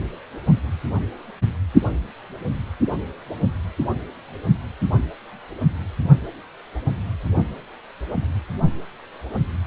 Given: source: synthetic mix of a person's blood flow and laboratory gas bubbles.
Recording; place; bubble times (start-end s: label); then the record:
Doppler ultrasound of blood flow; precordium
no bubbles
From the record:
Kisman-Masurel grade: 000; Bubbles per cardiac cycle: 0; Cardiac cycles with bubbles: 0%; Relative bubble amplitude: no bubbles discernible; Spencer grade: 0 (complete lack of bubble signals)